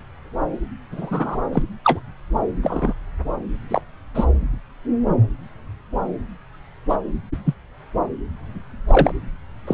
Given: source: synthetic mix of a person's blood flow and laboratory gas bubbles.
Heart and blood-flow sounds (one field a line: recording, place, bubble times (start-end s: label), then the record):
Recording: Doppler ultrasound of blood flow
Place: subclavian vein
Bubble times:
0.91-1.39 s: bubbles
1.52-1.62 s: bubbles
1.84-2.00 s: bubbles
2.62-2.93 s: bubbles
3.69-3.81 s: bubbles
4.15-4.26 s: bubbles
6.89-6.96 s: bubbles
7.45-7.54 s: bubbles
8.87-9.12 s: bubbles
9.67-9.74 s: bubbles
From the record:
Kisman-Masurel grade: 123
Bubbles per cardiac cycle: 1 to 2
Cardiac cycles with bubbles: 10 to 50%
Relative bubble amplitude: loud (0.450 to 0.775)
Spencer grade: 2 (many but less than half of the cardiac periods contain bubble signals, singularly or in groups)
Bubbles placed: anywhere in the cardiac cycle